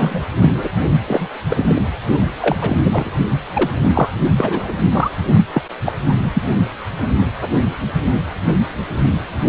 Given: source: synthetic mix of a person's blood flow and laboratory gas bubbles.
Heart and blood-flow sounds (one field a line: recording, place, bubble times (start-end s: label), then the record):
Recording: Doppler ultrasound of blood flow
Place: precordium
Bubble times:
0.00-0.23 s: bubbles
0.41-0.50 s: bubbles
0.54-0.69 s: bubbles
1.08-1.27 s: bubbles
1.49-1.82 s: bubbles
2.42-2.56 s: bubbles
2.60-2.77 s: bubbles
2.83-3.09 s: bubbles
3.53-3.71 s: bubbles
3.84-4.09 s: bubbles
4.38-5.11 s: bubbles
5.53-5.62 s: bubbles
5.84-5.93 s: bubbles
6.08-6.13 s: bubbles
6.21-6.31 s: bubbles
6.33-6.42 s: bubbles
From the record:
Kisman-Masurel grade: 233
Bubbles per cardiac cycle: several, 3 to 8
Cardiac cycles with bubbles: 50 to 99%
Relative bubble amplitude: loud (0.450 to 0.775)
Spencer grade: 3 (all of the cardiac periods contain showers or single bubble signals, but not dominating or overriding the cardiac motion signals)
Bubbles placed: only in the low amplitude regions of the cardiac cycle